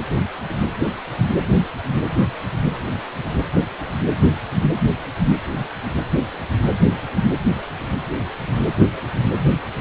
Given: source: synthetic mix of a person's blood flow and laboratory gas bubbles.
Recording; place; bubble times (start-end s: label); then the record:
Doppler ultrasound of blood flow; precordium
no bubbles
From the record:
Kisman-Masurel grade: 000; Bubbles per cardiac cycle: 0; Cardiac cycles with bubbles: 0%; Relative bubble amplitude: no bubbles discernible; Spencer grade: 0 (complete lack of bubble signals)